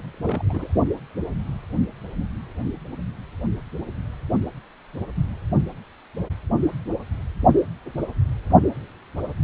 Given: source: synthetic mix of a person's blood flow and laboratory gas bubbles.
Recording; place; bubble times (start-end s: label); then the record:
Doppler ultrasound of blood flow; precordium
0.14-0.21 s: bubbles
0.25-0.72 s: bubbles
From the record:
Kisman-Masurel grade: 211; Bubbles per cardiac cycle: several, 3 to 8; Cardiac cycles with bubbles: 1 to 10%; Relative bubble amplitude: barely perceptible (0.100 to 0.250); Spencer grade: 1 (occasional bubble signal discernible with the cardiac motion signal, with majority of cardiac periods free of bubbles); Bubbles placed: only in the low amplitude regions of the cardiac cycle